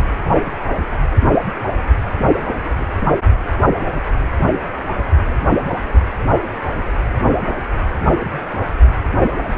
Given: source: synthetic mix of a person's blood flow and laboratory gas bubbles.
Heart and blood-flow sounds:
Doppler ultrasound of blood flow; precordium
0.36-0.42 s: bubbles
2.42-2.49 s: bubbles
2.79-2.87 s: bubbles
7.46-7.51 s: bubbles
8.25-8.47 s: bubbles
From the record:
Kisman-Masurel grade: 121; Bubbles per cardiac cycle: 1 to 2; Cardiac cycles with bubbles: 10 to 50%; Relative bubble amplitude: barely perceptible (0.100 to 0.250); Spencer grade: 2 (many but less than half of the cardiac periods contain bubble signals, singularly or in groups); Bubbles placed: only in the low amplitude regions of the cardiac cycle

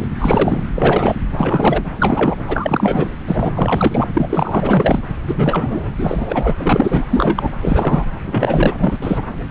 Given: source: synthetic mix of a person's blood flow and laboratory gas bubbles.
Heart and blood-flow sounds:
Doppler ultrasound of blood flow; subclavian vein
0.00-0.10 s: bubbles
0.19-0.64 s: bubbles
0.74-1.15 s: bubbles
1.33-1.83 s: bubbles
2.00-2.36 s: bubbles
2.48-3.12 s: bubbles
3.27-3.52 s: bubbles
3.54-4.04 s: bubbles
4.14-4.99 s: bubbles
5.26-7.05 s: bubbles
7.10-7.52 s: bubbles
7.62-8.05 s: bubbles
8.26-8.75 s: bubbles
8.79-8.98 s: bubbles
9.02-9.24 s: bubbles
From the record:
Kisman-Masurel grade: 343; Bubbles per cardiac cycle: rolling drumbeat, 9 or more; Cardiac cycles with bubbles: 100%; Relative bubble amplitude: loud (0.450 to 0.775); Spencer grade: 3 (all of the cardiac periods contain showers or single bubble signals, but not dominating or overriding the cardiac motion signals); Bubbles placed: anywhere in the cardiac cycle

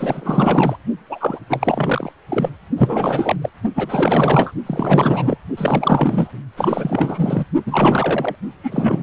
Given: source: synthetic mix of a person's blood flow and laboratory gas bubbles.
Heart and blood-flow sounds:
Doppler ultrasound of blood flow; precordium
0.00-0.77 s: bubbles
1.09-1.39 s: bubbles
1.49-2.12 s: bubbles
2.29-2.50 s: bubbles
2.76-3.36 s: bubbles
3.42-3.50 s: bubbles
3.75-4.52 s: bubbles
4.66-5.37 s: bubbles
5.57-6.32 s: bubbles
6.56-7.46 s: bubbles
7.65-8.36 s: bubbles
8.63-9.03 s: bubbles
From the record:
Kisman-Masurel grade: 444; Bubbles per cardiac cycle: continuous sound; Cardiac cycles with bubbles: 100%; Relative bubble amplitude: maximal (0.775 to 0.999); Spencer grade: 4 (maximum detectable bubble signal sounding continuously throughout systole and diastole of every cardiac period, and overriding the amplitude of the normal cardiac signals); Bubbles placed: only in the low amplitude regions of the cardiac cycle

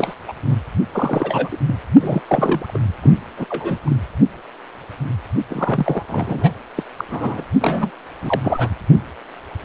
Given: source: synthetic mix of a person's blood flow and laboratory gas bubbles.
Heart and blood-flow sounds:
Doppler ultrasound of blood flow; precordium
0.00-0.14 s: bubbles
0.27-0.34 s: bubbles
0.47-0.56 s: bubbles
0.92-1.57 s: bubbles
1.65-1.75 s: bubbles
2.00-2.21 s: bubbles
2.27-2.79 s: bubbles
3.02-3.11 s: bubbles
3.38-3.46 s: bubbles
3.49-3.79 s: bubbles
3.85-3.97 s: bubbles
5.47-6.04 s: bubbles
6.08-6.50 s: bubbles
6.76-6.83 s: bubbles
6.97-7.05 s: bubbles
7.10-7.44 s: bubbles
7.60-7.91 s: bubbles
8.21-8.40 s: bubbles
8.43-8.70 s: bubbles
From the record:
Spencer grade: 3 (all of the cardiac periods contain showers or single bubble signals, but not dominating or overriding the cardiac motion signals); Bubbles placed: only in the low amplitude regions of the cardiac cycle

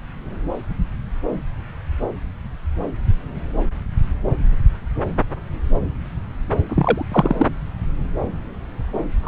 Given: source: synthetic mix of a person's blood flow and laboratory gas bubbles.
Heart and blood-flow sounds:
Doppler ultrasound of blood flow; subclavian vein
6.68-7.05 s: bubbles
7.11-7.46 s: bubbles
9.23-9.28 s: bubbles
From the record:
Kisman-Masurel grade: 223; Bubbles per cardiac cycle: several, 3 to 8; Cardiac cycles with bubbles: 10 to 50%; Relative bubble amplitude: loud (0.450 to 0.775); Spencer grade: 2 (many but less than half of the cardiac periods contain bubble signals, singularly or in groups); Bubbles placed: anywhere in the cardiac cycle

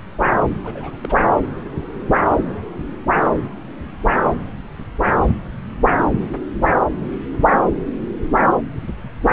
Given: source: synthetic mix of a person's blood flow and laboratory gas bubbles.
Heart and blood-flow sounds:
Doppler ultrasound of blood flow; subclavian vein
0.63-0.97 s: bubbles
1.04-1.15 s: bubbles
From the record:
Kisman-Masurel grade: 221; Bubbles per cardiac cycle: several, 3 to 8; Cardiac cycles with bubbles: 10 to 50%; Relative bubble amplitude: barely perceptible (0.100 to 0.250); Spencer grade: 2 (many but less than half of the cardiac periods contain bubble signals, singularly or in groups); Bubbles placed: anywhere in the cardiac cycle

